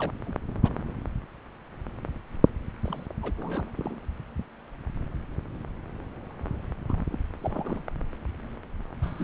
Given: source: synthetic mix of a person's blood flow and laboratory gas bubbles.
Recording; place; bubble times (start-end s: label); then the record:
Doppler ultrasound of blood flow; subclavian vein
0.00-0.10 s: bubbles
0.25-0.34 s: bubbles
0.47-0.54 s: bubbles
0.62-0.71 s: bubbles
2.82-3.06 s: bubbles
3.22-3.33 s: bubbles
3.37-3.71 s: bubbles
3.77-4.00 s: bubbles
6.88-7.00 s: bubbles
7.11-7.19 s: bubbles
7.42-7.82 s: bubbles
9.02-9.24 s: bubbles
From the record:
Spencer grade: 2 (many but less than half of the cardiac periods contain bubble signals, singularly or in groups); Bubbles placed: anywhere in the cardiac cycle